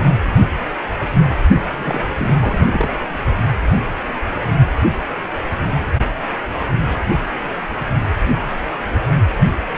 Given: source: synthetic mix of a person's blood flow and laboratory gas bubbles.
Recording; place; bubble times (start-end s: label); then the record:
Doppler ultrasound of blood flow; precordium
1.69-2.68 s: bubbles
2.71-3.04 s: bubbles
From the record:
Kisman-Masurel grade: 212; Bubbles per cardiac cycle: several, 3 to 8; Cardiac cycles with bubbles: 1 to 10%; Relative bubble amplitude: moderate (0.250 to 0.450); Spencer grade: 1 (occasional bubble signal discernible with the cardiac motion signal, with majority of cardiac periods free of bubbles); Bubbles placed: only in the low amplitude regions of the cardiac cycle